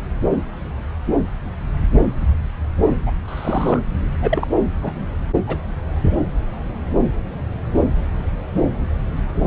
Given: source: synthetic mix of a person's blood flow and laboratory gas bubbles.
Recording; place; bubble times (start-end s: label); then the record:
Doppler ultrasound of blood flow; subclavian vein
3.06-3.13 s: bubbles
3.27-3.79 s: bubbles
4.22-4.48 s: bubbles
4.82-4.93 s: bubbles
5.46-5.58 s: bubbles
From the record:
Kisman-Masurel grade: 222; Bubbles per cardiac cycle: several, 3 to 8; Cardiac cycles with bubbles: 10 to 50%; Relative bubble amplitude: moderate (0.250 to 0.450); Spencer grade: 2 (many but less than half of the cardiac periods contain bubble signals, singularly or in groups); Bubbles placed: anywhere in the cardiac cycle